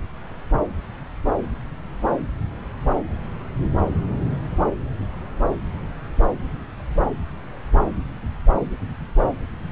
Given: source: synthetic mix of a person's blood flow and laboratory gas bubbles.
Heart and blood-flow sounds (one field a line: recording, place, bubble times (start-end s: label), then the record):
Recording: Doppler ultrasound of blood flow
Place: subclavian vein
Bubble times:
no bubbles
From the record:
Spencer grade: 0 (complete lack of bubble signals)